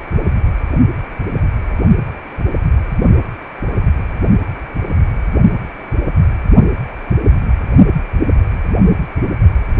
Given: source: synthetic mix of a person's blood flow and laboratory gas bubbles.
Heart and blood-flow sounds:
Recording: Doppler ultrasound of blood flow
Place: precordium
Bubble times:
no bubbles
From the record:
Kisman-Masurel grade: 000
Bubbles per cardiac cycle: 0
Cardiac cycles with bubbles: 0%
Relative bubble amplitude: no bubbles discernible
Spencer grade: 0 (complete lack of bubble signals)

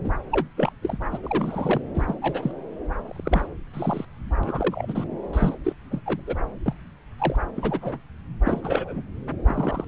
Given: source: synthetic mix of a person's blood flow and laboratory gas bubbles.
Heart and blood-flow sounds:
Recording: Doppler ultrasound of blood flow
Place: subclavian vein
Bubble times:
0.04-0.10 s: bubbles
0.32-0.46 s: bubbles
0.57-0.73 s: bubbles
0.82-0.97 s: bubbles
1.11-1.18 s: bubbles
1.22-1.81 s: bubbles
1.94-2.15 s: bubbles
2.22-2.52 s: bubbles
3.06-3.47 s: bubbles
3.74-4.05 s: bubbles
4.43-5.04 s: bubbles
5.33-5.54 s: bubbles
5.64-5.73 s: bubbles
5.90-6.01 s: bubbles
6.05-6.21 s: bubbles
6.26-6.35 s: bubbles
6.66-6.73 s: bubbles
7.19-7.36 s: bubbles
7.55-8.01 s: bubbles
8.46-9.03 s: bubbles
9.45-9.84 s: bubbles
From the record:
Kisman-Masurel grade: 242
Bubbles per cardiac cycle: several, 3 to 8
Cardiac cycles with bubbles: 100%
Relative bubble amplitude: moderate (0.250 to 0.450)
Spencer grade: 3 (all of the cardiac periods contain showers or single bubble signals, but not dominating or overriding the cardiac motion signals)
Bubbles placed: anywhere in the cardiac cycle

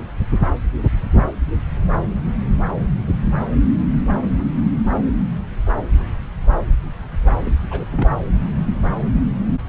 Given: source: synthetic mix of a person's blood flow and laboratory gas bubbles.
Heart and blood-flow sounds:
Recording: Doppler ultrasound of blood flow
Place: subclavian vein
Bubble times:
7.44-7.60 s: bubbles
7.70-7.86 s: bubbles
7.92-8.07 s: bubbles
8.15-8.21 s: bubbles
From the record:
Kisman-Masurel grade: 221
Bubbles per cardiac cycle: several, 3 to 8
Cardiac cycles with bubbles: 10 to 50%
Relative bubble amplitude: barely perceptible (0.100 to 0.250)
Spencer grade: 2 (many but less than half of the cardiac periods contain bubble signals, singularly or in groups)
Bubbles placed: anywhere in the cardiac cycle

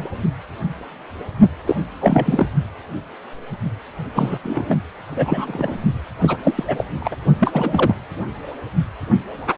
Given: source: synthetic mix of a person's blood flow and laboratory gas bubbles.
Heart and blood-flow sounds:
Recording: Doppler ultrasound of blood flow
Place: precordium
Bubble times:
0.00-0.10 s: bubbles
1.67-1.77 s: bubbles
2.00-2.46 s: bubbles
4.14-4.39 s: bubbles
4.43-4.76 s: bubbles
5.09-5.77 s: bubbles
6.21-6.37 s: bubbles
6.43-6.63 s: bubbles
6.67-6.84 s: bubbles
7.00-7.17 s: bubbles
7.38-7.95 s: bubbles
From the record:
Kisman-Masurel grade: 332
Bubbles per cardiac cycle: rolling drumbeat, 9 or more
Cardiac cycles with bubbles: 50 to 99%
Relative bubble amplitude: moderate (0.250 to 0.450)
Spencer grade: 3 (all of the cardiac periods contain showers or single bubble signals, but not dominating or overriding the cardiac motion signals)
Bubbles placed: only in the low amplitude regions of the cardiac cycle

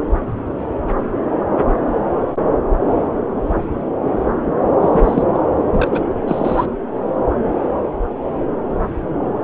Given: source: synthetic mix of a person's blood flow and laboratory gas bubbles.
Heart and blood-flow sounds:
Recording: Doppler ultrasound of blood flow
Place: subclavian vein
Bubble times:
0.00-0.03 s: bubbles
4.81-5.23 s: bubbles
5.33-5.40 s: bubbles
5.66-6.02 s: bubbles
6.27-6.65 s: bubbles
From the record:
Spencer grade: 2 (many but less than half of the cardiac periods contain bubble signals, singularly or in groups)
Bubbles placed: anywhere in the cardiac cycle

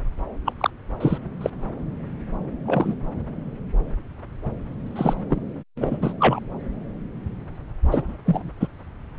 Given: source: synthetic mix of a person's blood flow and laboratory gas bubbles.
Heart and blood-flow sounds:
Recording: Doppler ultrasound of blood flow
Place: subclavian vein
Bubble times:
0.45-0.53 s: bubbles
0.59-0.70 s: bubbles
1.00-1.18 s: bubbles
1.40-1.50 s: bubbles
2.65-2.94 s: bubbles
4.96-5.13 s: bubbles
5.29-5.40 s: bubbles
5.80-5.99 s: bubbles
6.01-6.13 s: bubbles
6.19-6.39 s: bubbles
7.85-8.17 s: bubbles
8.26-8.51 s: bubbles
8.60-8.68 s: bubbles
From the record:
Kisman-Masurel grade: 222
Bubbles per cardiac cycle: several, 3 to 8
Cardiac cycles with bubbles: 10 to 50%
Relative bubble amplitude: moderate (0.250 to 0.450)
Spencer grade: 2 (many but less than half of the cardiac periods contain bubble signals, singularly or in groups)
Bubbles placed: anywhere in the cardiac cycle

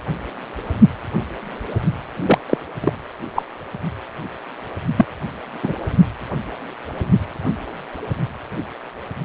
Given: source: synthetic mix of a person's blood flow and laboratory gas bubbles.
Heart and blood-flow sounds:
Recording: Doppler ultrasound of blood flow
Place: precordium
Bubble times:
2.25-2.38 s: bubbles
2.50-2.57 s: bubbles
2.83-2.93 s: bubbles
3.35-3.43 s: bubbles
4.97-5.05 s: bubbles
5.63-5.74 s: bubbles
From the record:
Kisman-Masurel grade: 123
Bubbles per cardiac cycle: 1 to 2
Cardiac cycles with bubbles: 10 to 50%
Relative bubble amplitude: loud (0.450 to 0.775)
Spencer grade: 2 (many but less than half of the cardiac periods contain bubble signals, singularly or in groups)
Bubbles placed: anywhere in the cardiac cycle

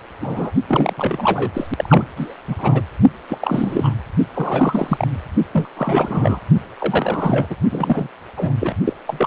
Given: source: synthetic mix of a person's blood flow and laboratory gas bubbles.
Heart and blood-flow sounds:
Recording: Doppler ultrasound of blood flow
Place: precordium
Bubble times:
0.20-0.51 s: bubbles
0.68-0.93 s: bubbles
0.96-1.51 s: bubbles
1.54-1.67 s: bubbles
1.77-2.07 s: bubbles
2.16-2.35 s: bubbles
2.48-2.83 s: bubbles
3.29-3.94 s: bubbles
4.34-5.07 s: bubbles
5.52-5.68 s: bubbles
5.75-6.39 s: bubbles
6.78-7.47 s: bubbles
7.50-7.56 s: bubbles
7.71-8.09 s: bubbles
8.37-8.54 s: bubbles
8.61-8.75 s: bubbles
8.85-8.93 s: bubbles
9.07-9.27 s: bubbles
From the record:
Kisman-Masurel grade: 343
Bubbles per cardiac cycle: rolling drumbeat, 9 or more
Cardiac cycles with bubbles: 100%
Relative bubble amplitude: loud (0.450 to 0.775)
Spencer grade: 3 (all of the cardiac periods contain showers or single bubble signals, but not dominating or overriding the cardiac motion signals)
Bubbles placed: only in the low amplitude regions of the cardiac cycle

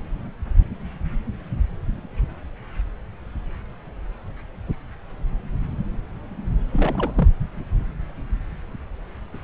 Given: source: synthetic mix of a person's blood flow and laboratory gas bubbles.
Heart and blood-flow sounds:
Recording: Doppler ultrasound of blood flow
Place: subclavian vein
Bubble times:
6.72-7.12 s: bubbles
7.16-7.29 s: bubbles
From the record:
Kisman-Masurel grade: 211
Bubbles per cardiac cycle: several, 3 to 8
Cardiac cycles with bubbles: 1 to 10%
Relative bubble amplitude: barely perceptible (0.100 to 0.250)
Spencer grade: 1 (occasional bubble signal discernible with the cardiac motion signal, with majority of cardiac periods free of bubbles)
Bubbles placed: anywhere in the cardiac cycle

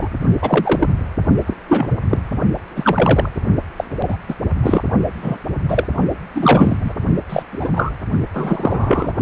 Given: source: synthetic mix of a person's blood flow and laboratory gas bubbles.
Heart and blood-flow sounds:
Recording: Doppler ultrasound of blood flow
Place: precordium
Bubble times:
0.00-0.09 s: bubbles
0.41-0.87 s: bubbles
1.47-1.54 s: bubbles
1.68-1.91 s: bubbles
2.09-2.19 s: bubbles
2.76-3.29 s: bubbles
3.77-3.84 s: bubbles
4.08-4.17 s: bubbles
4.29-4.34 s: bubbles
4.62-4.83 s: bubbles
5.22-5.37 s: bubbles
5.68-5.88 s: bubbles
6.34-6.77 s: bubbles
6.84-6.93 s: bubbles
7.29-7.42 s: bubbles
7.52-7.69 s: bubbles
7.75-7.91 s: bubbles
8.33-9.12 s: bubbles
From the record:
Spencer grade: 3 (all of the cardiac periods contain showers or single bubble signals, but not dominating or overriding the cardiac motion signals)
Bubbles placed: only in the low amplitude regions of the cardiac cycle

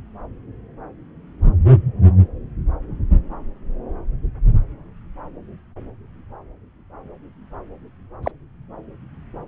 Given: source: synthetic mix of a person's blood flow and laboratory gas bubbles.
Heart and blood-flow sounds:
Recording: Doppler ultrasound of blood flow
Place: subclavian vein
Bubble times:
8.23-8.32 s: bubbles
From the record:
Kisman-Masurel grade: 112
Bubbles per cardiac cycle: 1 to 2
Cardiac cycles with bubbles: 1 to 10%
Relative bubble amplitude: moderate (0.250 to 0.450)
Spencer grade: 1 (occasional bubble signal discernible with the cardiac motion signal, with majority of cardiac periods free of bubbles)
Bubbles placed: anywhere in the cardiac cycle

